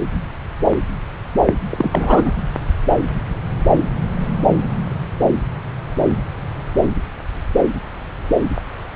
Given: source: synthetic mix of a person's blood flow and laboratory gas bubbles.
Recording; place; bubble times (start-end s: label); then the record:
Doppler ultrasound of blood flow; subclavian vein
1.71-2.32 s: bubbles
From the record:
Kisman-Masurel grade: 223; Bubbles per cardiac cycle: several, 3 to 8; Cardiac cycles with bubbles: 10 to 50%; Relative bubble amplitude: loud (0.450 to 0.775); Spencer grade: 2 (many but less than half of the cardiac periods contain bubble signals, singularly or in groups); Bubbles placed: anywhere in the cardiac cycle